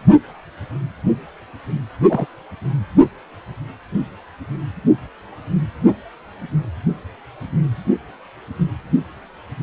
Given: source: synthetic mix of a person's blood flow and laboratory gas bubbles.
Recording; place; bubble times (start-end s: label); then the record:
Doppler ultrasound of blood flow; precordium
2.09-2.26 s: bubbles
From the record:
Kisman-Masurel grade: 112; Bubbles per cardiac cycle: 1 to 2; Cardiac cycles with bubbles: 1 to 10%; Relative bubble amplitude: moderate (0.250 to 0.450); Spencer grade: 1 (occasional bubble signal discernible with the cardiac motion signal, with majority of cardiac periods free of bubbles); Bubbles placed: only in the low amplitude regions of the cardiac cycle